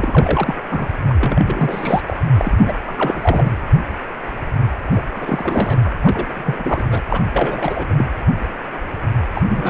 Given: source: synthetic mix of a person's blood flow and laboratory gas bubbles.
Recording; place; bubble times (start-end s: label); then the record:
Doppler ultrasound of blood flow; precordium
0.00-0.55 s: bubbles
0.70-0.88 s: bubbles
1.08-2.02 s: bubbles
2.07-2.17 s: bubbles
2.35-2.73 s: bubbles
2.86-3.51 s: bubbles
4.92-5.04 s: bubbles
5.14-5.92 s: bubbles
6.03-6.27 s: bubbles
6.35-6.83 s: bubbles
6.91-7.00 s: bubbles
7.08-7.21 s: bubbles
7.33-8.04 s: bubbles
9.35-9.42 s: bubbles
9.48-9.70 s: bubbles
From the record:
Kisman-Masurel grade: 332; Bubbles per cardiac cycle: rolling drumbeat, 9 or more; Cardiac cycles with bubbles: 50 to 99%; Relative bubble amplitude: moderate (0.250 to 0.450); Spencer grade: 3 (all of the cardiac periods contain showers or single bubble signals, but not dominating or overriding the cardiac motion signals); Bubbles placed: anywhere in the cardiac cycle